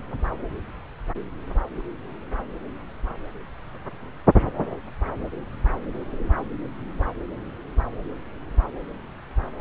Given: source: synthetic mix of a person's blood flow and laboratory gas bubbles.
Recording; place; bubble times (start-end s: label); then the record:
Doppler ultrasound of blood flow; subclavian vein
no bubbles
From the record:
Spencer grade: 0 (complete lack of bubble signals)